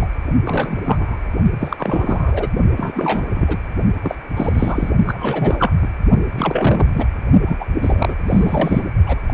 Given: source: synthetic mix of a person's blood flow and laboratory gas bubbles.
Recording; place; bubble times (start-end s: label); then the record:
Doppler ultrasound of blood flow; precordium
0.00-0.07 s: bubbles
0.45-0.82 s: bubbles
0.84-1.20 s: bubbles
1.59-2.48 s: bubbles
2.76-3.25 s: bubbles
3.33-3.57 s: bubbles
4.03-4.15 s: bubbles
4.35-4.89 s: bubbles
5.07-5.72 s: bubbles
5.82-5.88 s: bubbles
6.33-6.89 s: bubbles
6.94-7.07 s: bubbles
7.46-7.66 s: bubbles
7.81-8.15 s: bubbles
8.27-8.88 s: bubbles
9.06-9.20 s: bubbles
9.27-9.34 s: bubbles
From the record:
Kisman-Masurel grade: 343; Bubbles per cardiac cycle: rolling drumbeat, 9 or more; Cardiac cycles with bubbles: 100%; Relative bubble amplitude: loud (0.450 to 0.775); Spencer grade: 3 (all of the cardiac periods contain showers or single bubble signals, but not dominating or overriding the cardiac motion signals); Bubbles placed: only in the low amplitude regions of the cardiac cycle